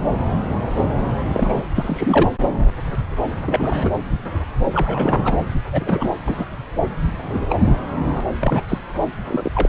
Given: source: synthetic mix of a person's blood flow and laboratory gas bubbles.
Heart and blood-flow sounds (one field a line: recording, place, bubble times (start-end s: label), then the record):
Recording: Doppler ultrasound of blood flow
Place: subclavian vein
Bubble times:
1.33-1.64 s: bubbles
1.75-2.29 s: bubbles
3.46-3.91 s: bubbles
4.74-5.36 s: bubbles
5.72-6.08 s: bubbles
6.25-6.46 s: bubbles
7.29-7.46 s: bubbles
7.49-7.55 s: bubbles
8.06-8.11 s: bubbles
8.14-8.21 s: bubbles
8.40-8.61 s: bubbles
8.68-8.78 s: bubbles
9.28-9.49 s: bubbles
9.54-9.69 s: bubbles
From the record:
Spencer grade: 3 (all of the cardiac periods contain showers or single bubble signals, but not dominating or overriding the cardiac motion signals)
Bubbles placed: anywhere in the cardiac cycle